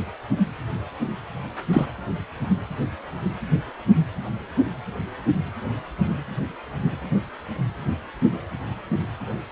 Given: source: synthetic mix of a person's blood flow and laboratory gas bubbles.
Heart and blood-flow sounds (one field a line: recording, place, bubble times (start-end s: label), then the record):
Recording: Doppler ultrasound of blood flow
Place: precordium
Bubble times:
1.72-1.85 s: bubbles
From the record:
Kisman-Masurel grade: 113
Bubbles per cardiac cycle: 1 to 2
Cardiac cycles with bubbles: 1 to 10%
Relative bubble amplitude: loud (0.450 to 0.775)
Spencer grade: 1 (occasional bubble signal discernible with the cardiac motion signal, with majority of cardiac periods free of bubbles)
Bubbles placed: anywhere in the cardiac cycle